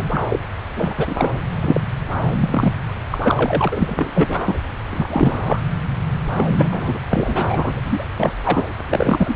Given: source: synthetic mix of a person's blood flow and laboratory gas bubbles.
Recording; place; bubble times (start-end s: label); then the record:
Doppler ultrasound of blood flow; subclavian vein
0.00-0.25 s: bubbles
0.28-0.39 s: bubbles
0.76-0.94 s: bubbles
0.97-1.40 s: bubbles
1.62-1.81 s: bubbles
2.31-2.73 s: bubbles
3.11-3.18 s: bubbles
3.23-4.10 s: bubbles
4.14-4.57 s: bubbles
4.90-5.59 s: bubbles
6.34-6.49 s: bubbles
6.57-6.68 s: bubbles
6.71-6.98 s: bubbles
7.09-7.80 s: bubbles
7.84-8.05 s: bubbles
8.20-8.32 s: bubbles
8.44-8.66 s: bubbles
8.89-9.36 s: bubbles
From the record:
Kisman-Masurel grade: 343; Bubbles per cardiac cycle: rolling drumbeat, 9 or more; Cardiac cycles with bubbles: 100%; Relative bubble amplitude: loud (0.450 to 0.775); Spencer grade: 3 (all of the cardiac periods contain showers or single bubble signals, but not dominating or overriding the cardiac motion signals); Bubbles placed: anywhere in the cardiac cycle